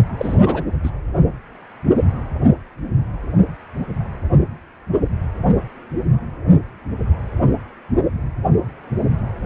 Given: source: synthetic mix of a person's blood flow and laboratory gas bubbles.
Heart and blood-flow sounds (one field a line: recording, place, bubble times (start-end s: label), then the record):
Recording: Doppler ultrasound of blood flow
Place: precordium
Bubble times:
0.17-0.38 s: bubbles
0.41-0.64 s: bubbles
0.83-0.90 s: bubbles
From the record:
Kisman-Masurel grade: 212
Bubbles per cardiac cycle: several, 3 to 8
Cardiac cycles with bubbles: 1 to 10%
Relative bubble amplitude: moderate (0.250 to 0.450)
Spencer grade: 1 (occasional bubble signal discernible with the cardiac motion signal, with majority of cardiac periods free of bubbles)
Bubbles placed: only in the low amplitude regions of the cardiac cycle